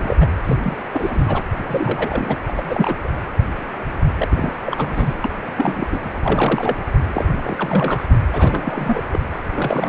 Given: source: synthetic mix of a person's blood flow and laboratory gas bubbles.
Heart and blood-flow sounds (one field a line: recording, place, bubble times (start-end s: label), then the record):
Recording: Doppler ultrasound of blood flow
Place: precordium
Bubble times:
0.00-0.17 s: bubbles
0.20-0.26 s: bubbles
0.44-0.57 s: bubbles
0.62-0.77 s: bubbles
0.93-1.43 s: bubbles
1.57-2.37 s: bubbles
2.47-2.95 s: bubbles
3.04-3.09 s: bubbles
4.17-4.51 s: bubbles
4.66-5.30 s: bubbles
5.48-5.53 s: bubbles
5.58-5.86 s: bubbles
5.92-6.00 s: bubbles
6.04-6.09 s: bubbles
6.23-6.77 s: bubbles
7.14-7.28 s: bubbles
7.42-8.18 s: bubbles
8.33-9.02 s: bubbles
9.11-9.20 s: bubbles
9.54-9.89 s: bubbles
From the record:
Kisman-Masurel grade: 342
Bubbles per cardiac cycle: rolling drumbeat, 9 or more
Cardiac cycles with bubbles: 100%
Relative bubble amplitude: moderate (0.250 to 0.450)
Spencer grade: 3 (all of the cardiac periods contain showers or single bubble signals, but not dominating or overriding the cardiac motion signals)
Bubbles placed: anywhere in the cardiac cycle